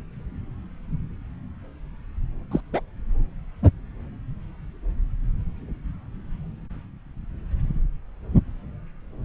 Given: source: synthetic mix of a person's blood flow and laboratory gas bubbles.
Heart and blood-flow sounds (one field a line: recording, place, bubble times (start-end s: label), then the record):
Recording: Doppler ultrasound of blood flow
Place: subclavian vein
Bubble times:
2.51-2.60 s: bubbles
2.72-2.81 s: bubbles
From the record:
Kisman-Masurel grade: 112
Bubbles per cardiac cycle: 1 to 2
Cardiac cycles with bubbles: 1 to 10%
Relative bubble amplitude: moderate (0.250 to 0.450)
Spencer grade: 1 (occasional bubble signal discernible with the cardiac motion signal, with majority of cardiac periods free of bubbles)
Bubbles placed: anywhere in the cardiac cycle